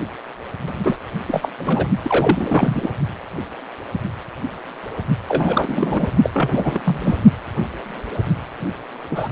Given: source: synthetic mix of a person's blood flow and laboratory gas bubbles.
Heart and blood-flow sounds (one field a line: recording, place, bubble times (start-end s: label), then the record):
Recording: Doppler ultrasound of blood flow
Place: precordium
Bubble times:
0.84-0.96 s: bubbles
1.28-1.49 s: bubbles
1.58-1.88 s: bubbles
2.02-2.89 s: bubbles
5.28-6.07 s: bubbles
6.23-6.30 s: bubbles
6.33-6.81 s: bubbles
6.85-7.17 s: bubbles
9.10-9.28 s: bubbles
From the record:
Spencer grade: 3 (all of the cardiac periods contain showers or single bubble signals, but not dominating or overriding the cardiac motion signals)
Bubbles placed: only in the low amplitude regions of the cardiac cycle